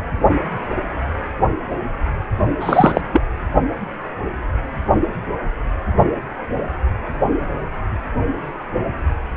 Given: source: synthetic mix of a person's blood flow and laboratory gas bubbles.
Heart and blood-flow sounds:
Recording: Doppler ultrasound of blood flow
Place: precordium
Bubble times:
2.60-3.01 s: bubbles
3.12-3.21 s: bubbles
From the record:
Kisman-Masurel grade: 213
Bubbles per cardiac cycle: several, 3 to 8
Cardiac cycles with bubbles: 1 to 10%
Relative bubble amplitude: loud (0.450 to 0.775)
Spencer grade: 1 (occasional bubble signal discernible with the cardiac motion signal, with majority of cardiac periods free of bubbles)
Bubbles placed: only in the low amplitude regions of the cardiac cycle

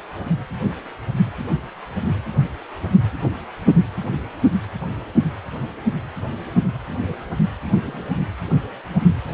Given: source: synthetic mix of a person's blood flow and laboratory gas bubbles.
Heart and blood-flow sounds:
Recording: Doppler ultrasound of blood flow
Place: precordium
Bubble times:
0.68-0.73 s: bubbles
7.85-8.05 s: bubbles
From the record:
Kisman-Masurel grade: 121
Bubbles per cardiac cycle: 1 to 2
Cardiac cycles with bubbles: 10 to 50%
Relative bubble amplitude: barely perceptible (0.100 to 0.250)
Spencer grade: 2 (many but less than half of the cardiac periods contain bubble signals, singularly or in groups)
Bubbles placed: anywhere in the cardiac cycle

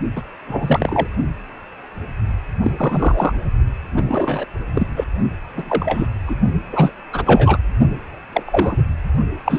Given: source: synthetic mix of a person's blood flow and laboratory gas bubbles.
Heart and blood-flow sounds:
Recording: Doppler ultrasound of blood flow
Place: precordium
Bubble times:
0.15-0.22 s: bubbles
0.47-1.07 s: bubbles
2.62-2.71 s: bubbles
2.77-3.33 s: bubbles
3.96-4.46 s: bubbles
4.75-4.87 s: bubbles
4.96-5.04 s: bubbles
5.57-6.07 s: bubbles
6.25-6.36 s: bubbles
6.72-6.91 s: bubbles
7.12-7.23 s: bubbles
7.26-7.58 s: bubbles
8.32-8.43 s: bubbles
8.46-8.77 s: bubbles
9.45-9.59 s: bubbles
From the record:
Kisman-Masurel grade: 233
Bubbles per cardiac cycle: several, 3 to 8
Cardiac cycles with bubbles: 50 to 99%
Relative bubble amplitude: loud (0.450 to 0.775)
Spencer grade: 3 (all of the cardiac periods contain showers or single bubble signals, but not dominating or overriding the cardiac motion signals)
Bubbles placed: only in the low amplitude regions of the cardiac cycle

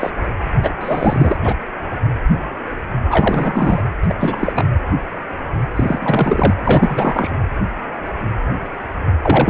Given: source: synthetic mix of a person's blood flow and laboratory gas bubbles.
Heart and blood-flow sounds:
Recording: Doppler ultrasound of blood flow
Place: precordium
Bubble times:
0.00-0.11 s: bubbles
0.63-0.70 s: bubbles
0.80-1.37 s: bubbles
1.43-1.54 s: bubbles
3.10-3.82 s: bubbles
4.03-4.14 s: bubbles
4.19-4.53 s: bubbles
4.55-4.66 s: bubbles
5.75-6.55 s: bubbles
6.63-7.34 s: bubbles
9.21-9.50 s: bubbles
From the record:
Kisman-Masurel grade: 333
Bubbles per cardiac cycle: rolling drumbeat, 9 or more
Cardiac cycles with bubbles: 50 to 99%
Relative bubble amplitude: loud (0.450 to 0.775)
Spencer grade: 3 (all of the cardiac periods contain showers or single bubble signals, but not dominating or overriding the cardiac motion signals)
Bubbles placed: anywhere in the cardiac cycle

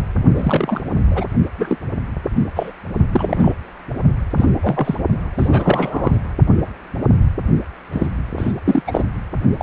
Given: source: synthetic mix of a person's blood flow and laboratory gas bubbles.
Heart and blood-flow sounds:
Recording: Doppler ultrasound of blood flow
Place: precordium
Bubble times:
0.36-0.81 s: bubbles
1.10-1.25 s: bubbles
1.58-1.77 s: bubbles
2.55-2.71 s: bubbles
3.12-3.53 s: bubbles
4.37-4.46 s: bubbles
4.61-4.96 s: bubbles
5.37-6.19 s: bubbles
7.92-8.07 s: bubbles
8.38-8.53 s: bubbles
8.65-8.82 s: bubbles
8.87-9.04 s: bubbles
9.58-9.63 s: bubbles
From the record:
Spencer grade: 3 (all of the cardiac periods contain showers or single bubble signals, but not dominating or overriding the cardiac motion signals)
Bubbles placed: only in the low amplitude regions of the cardiac cycle

